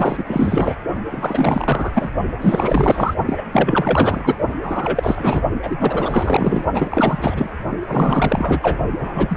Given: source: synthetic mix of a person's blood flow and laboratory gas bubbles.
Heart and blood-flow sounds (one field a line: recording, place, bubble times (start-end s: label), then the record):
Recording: Doppler ultrasound of blood flow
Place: precordium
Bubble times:
0.00-0.24 s: bubbles
0.27-0.76 s: bubbles
1.09-1.90 s: bubbles
1.94-2.10 s: bubbles
2.40-3.14 s: bubbles
3.26-3.42 s: bubbles
3.52-4.36 s: bubbles
4.62-5.42 s: bubbles
5.62-6.65 s: bubbles
6.73-7.50 s: bubbles
7.87-8.78 s: bubbles
8.99-9.36 s: bubbles
From the record:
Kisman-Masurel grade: 444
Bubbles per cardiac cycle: continuous sound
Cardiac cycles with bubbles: 100%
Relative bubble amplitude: maximal (0.775 to 0.999)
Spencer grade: 4 (maximum detectable bubble signal sounding continuously throughout systole and diastole of every cardiac period, and overriding the amplitude of the normal cardiac signals)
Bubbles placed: only in the low amplitude regions of the cardiac cycle